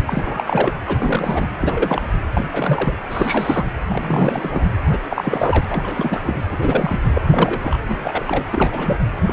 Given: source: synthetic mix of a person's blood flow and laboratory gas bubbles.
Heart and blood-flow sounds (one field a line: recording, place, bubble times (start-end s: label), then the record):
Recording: Doppler ultrasound of blood flow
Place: precordium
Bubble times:
0.07-0.73 s: bubbles
0.87-1.47 s: bubbles
1.60-2.02 s: bubbles
2.33-2.46 s: bubbles
2.52-2.96 s: bubbles
3.09-3.65 s: bubbles
3.89-4.67 s: bubbles
4.90-4.99 s: bubbles
5.10-5.65 s: bubbles
5.69-6.20 s: bubbles
6.23-6.43 s: bubbles
6.52-7.00 s: bubbles
7.15-7.22 s: bubbles
7.28-7.79 s: bubbles
7.88-8.25 s: bubbles
8.27-8.44 s: bubbles
8.52-8.98 s: bubbles
9.26-9.33 s: bubbles
From the record:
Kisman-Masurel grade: 332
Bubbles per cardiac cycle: rolling drumbeat, 9 or more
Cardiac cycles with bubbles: 50 to 99%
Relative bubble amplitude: moderate (0.250 to 0.450)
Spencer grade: 3 (all of the cardiac periods contain showers or single bubble signals, but not dominating or overriding the cardiac motion signals)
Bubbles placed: anywhere in the cardiac cycle